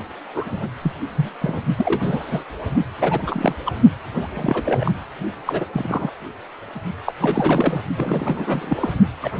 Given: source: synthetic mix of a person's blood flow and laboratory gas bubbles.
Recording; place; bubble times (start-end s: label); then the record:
Doppler ultrasound of blood flow; precordium
0.34-0.67 s: bubbles
0.82-0.92 s: bubbles
1.15-1.29 s: bubbles
1.41-1.60 s: bubbles
1.77-2.44 s: bubbles
3.00-3.54 s: bubbles
3.65-3.73 s: bubbles
4.13-4.92 s: bubbles
5.46-5.66 s: bubbles
5.73-6.12 s: bubbles
7.06-7.15 s: bubbles
7.21-7.82 s: bubbles
7.97-8.93 s: bubbles
9.21-9.30 s: bubbles
9.35-9.40 s: bubbles
From the record:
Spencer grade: 3 (all of the cardiac periods contain showers or single bubble signals, but not dominating or overriding the cardiac motion signals); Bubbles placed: only in the low amplitude regions of the cardiac cycle